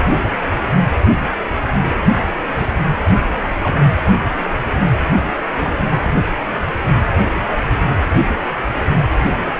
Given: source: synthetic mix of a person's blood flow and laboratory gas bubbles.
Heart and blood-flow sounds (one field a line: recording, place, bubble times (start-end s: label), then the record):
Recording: Doppler ultrasound of blood flow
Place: precordium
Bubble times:
2.56-2.70 s: bubbles
3.63-3.84 s: bubbles
5.64-5.75 s: bubbles
From the record:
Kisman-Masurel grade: 121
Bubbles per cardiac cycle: 1 to 2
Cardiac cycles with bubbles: 10 to 50%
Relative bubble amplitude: barely perceptible (0.100 to 0.250)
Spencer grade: 2 (many but less than half of the cardiac periods contain bubble signals, singularly or in groups)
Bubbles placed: anywhere in the cardiac cycle